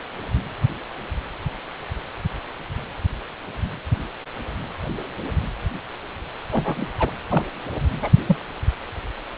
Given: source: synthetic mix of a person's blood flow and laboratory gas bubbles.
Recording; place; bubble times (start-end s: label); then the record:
Doppler ultrasound of blood flow; precordium
6.50-6.87 s: bubbles
6.99-7.12 s: bubbles
7.28-7.46 s: bubbles
7.97-8.17 s: bubbles
8.28-8.37 s: bubbles
From the record:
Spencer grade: 2 (many but less than half of the cardiac periods contain bubble signals, singularly or in groups); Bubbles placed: anywhere in the cardiac cycle